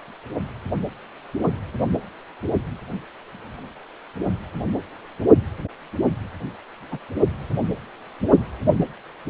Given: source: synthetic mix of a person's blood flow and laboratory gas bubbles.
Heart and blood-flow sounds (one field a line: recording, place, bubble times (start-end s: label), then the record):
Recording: Doppler ultrasound of blood flow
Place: precordium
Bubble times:
6.92-6.98 s: bubbles
From the record:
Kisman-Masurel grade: 111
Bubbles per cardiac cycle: 1 to 2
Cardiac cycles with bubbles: 1 to 10%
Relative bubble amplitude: barely perceptible (0.100 to 0.250)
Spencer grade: 1 (occasional bubble signal discernible with the cardiac motion signal, with majority of cardiac periods free of bubbles)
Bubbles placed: anywhere in the cardiac cycle